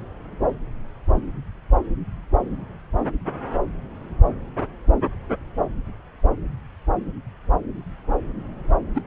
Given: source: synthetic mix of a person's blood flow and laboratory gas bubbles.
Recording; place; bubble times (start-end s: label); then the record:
Doppler ultrasound of blood flow; subclavian vein
8.94-9.02 s: bubbles
From the record:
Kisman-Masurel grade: 112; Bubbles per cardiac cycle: 1 to 2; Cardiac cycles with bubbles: 1 to 10%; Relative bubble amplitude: moderate (0.250 to 0.450); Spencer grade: 1 (occasional bubble signal discernible with the cardiac motion signal, with majority of cardiac periods free of bubbles); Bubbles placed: anywhere in the cardiac cycle